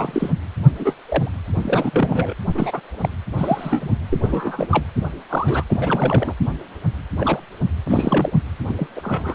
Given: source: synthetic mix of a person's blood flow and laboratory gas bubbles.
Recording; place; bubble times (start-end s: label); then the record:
Doppler ultrasound of blood flow; precordium
0.00-0.32 s: bubbles
0.80-0.94 s: bubbles
1.05-1.33 s: bubbles
1.62-2.33 s: bubbles
2.54-2.80 s: bubbles
3.01-3.09 s: bubbles
3.37-3.90 s: bubbles
4.10-4.67 s: bubbles
4.71-4.84 s: bubbles
5.29-5.63 s: bubbles
5.67-6.34 s: bubbles
7.17-7.40 s: bubbles
7.86-8.31 s: bubbles
8.67-8.87 s: bubbles
8.96-9.35 s: bubbles
From the record:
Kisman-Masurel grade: 232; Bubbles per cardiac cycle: several, 3 to 8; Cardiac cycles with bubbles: 50 to 99%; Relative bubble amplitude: moderate (0.250 to 0.450); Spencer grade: 3 (all of the cardiac periods contain showers or single bubble signals, but not dominating or overriding the cardiac motion signals); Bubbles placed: anywhere in the cardiac cycle